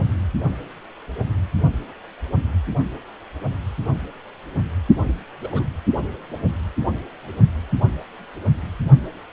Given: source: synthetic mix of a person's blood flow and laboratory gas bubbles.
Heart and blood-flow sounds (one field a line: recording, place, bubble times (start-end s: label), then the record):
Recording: Doppler ultrasound of blood flow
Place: precordium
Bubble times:
5.07-5.17 s: bubbles
5.41-5.67 s: bubbles
From the record:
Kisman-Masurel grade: 211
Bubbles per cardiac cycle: several, 3 to 8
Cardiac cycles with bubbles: 1 to 10%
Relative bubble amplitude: barely perceptible (0.100 to 0.250)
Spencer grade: 1 (occasional bubble signal discernible with the cardiac motion signal, with majority of cardiac periods free of bubbles)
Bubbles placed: only in the low amplitude regions of the cardiac cycle